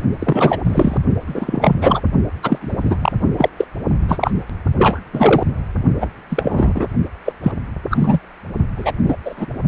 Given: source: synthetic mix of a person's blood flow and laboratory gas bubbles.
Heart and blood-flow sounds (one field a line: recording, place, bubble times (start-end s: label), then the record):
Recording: Doppler ultrasound of blood flow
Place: precordium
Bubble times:
0.19-0.57 s: bubbles
0.64-0.98 s: bubbles
1.26-1.76 s: bubbles
1.82-2.01 s: bubbles
2.42-2.58 s: bubbles
2.61-2.96 s: bubbles
3.00-3.12 s: bubbles
3.38-3.50 s: bubbles
3.57-3.64 s: bubbles
4.08-4.31 s: bubbles
4.78-5.00 s: bubbles
5.13-5.43 s: bubbles
6.00-6.09 s: bubbles
6.29-6.87 s: bubbles
7.25-7.33 s: bubbles
7.42-7.52 s: bubbles
7.90-8.19 s: bubbles
8.75-8.92 s: bubbles
9.03-9.16 s: bubbles
9.25-9.46 s: bubbles
From the record:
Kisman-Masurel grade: 243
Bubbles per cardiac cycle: several, 3 to 8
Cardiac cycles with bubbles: 100%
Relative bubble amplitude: loud (0.450 to 0.775)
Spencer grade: 3 (all of the cardiac periods contain showers or single bubble signals, but not dominating or overriding the cardiac motion signals)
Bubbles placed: only in the low amplitude regions of the cardiac cycle